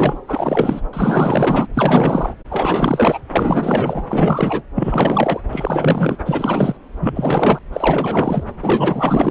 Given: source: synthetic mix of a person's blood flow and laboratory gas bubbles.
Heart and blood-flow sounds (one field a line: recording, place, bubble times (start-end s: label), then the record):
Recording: Doppler ultrasound of blood flow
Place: subclavian vein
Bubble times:
0.00-0.19 s: bubbles
0.28-0.81 s: bubbles
0.93-1.67 s: bubbles
1.73-2.35 s: bubbles
2.50-3.20 s: bubbles
3.33-4.04 s: bubbles
4.09-4.62 s: bubbles
4.74-5.40 s: bubbles
5.51-6.17 s: bubbles
6.25-6.77 s: bubbles
7.00-7.59 s: bubbles
7.72-8.43 s: bubbles
8.61-9.31 s: bubbles
From the record:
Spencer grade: 4 (maximum detectable bubble signal sounding continuously throughout systole and diastole of every cardiac period, and overriding the amplitude of the normal cardiac signals)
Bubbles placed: anywhere in the cardiac cycle